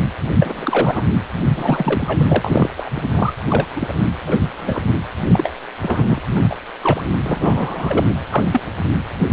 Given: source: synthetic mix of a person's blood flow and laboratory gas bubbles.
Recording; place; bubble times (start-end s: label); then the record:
Doppler ultrasound of blood flow; precordium
0.41-1.03 s: bubbles
1.55-2.70 s: bubbles
2.77-2.90 s: bubbles
2.95-3.02 s: bubbles
3.14-3.33 s: bubbles
3.49-3.67 s: bubbles
3.76-3.94 s: bubbles
4.26-4.39 s: bubbles
4.58-4.81 s: bubbles
5.23-5.54 s: bubbles
5.82-6.18 s: bubbles
6.30-6.55 s: bubbles
6.83-7.02 s: bubbles
7.23-8.15 s: bubbles
8.30-8.44 s: bubbles
8.53-8.61 s: bubbles
9.31-9.33 s: bubbles
From the record:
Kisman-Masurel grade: 232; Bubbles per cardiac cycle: several, 3 to 8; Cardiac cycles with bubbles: 50 to 99%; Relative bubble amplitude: moderate (0.250 to 0.450); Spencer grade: 3 (all of the cardiac periods contain showers or single bubble signals, but not dominating or overriding the cardiac motion signals); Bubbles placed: anywhere in the cardiac cycle